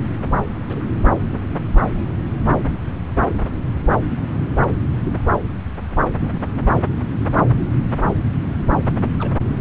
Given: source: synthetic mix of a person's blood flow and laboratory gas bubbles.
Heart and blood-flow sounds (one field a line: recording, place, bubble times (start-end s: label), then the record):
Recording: Doppler ultrasound of blood flow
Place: subclavian vein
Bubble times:
0.69-0.85 s: bubbles
6.20-6.43 s: bubbles
9.19-9.32 s: bubbles
From the record:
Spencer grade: 2 (many but less than half of the cardiac periods contain bubble signals, singularly or in groups)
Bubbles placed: anywhere in the cardiac cycle